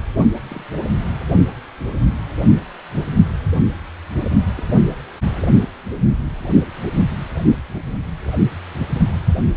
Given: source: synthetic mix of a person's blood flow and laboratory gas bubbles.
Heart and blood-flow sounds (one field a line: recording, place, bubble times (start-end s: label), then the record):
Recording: Doppler ultrasound of blood flow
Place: precordium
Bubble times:
0.48-0.65 s: bubbles
0.73-0.78 s: bubbles
4.55-4.64 s: bubbles
From the record:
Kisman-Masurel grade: 121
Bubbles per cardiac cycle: 1 to 2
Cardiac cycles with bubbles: 10 to 50%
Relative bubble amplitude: barely perceptible (0.100 to 0.250)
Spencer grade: 2 (many but less than half of the cardiac periods contain bubble signals, singularly or in groups)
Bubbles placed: only in the low amplitude regions of the cardiac cycle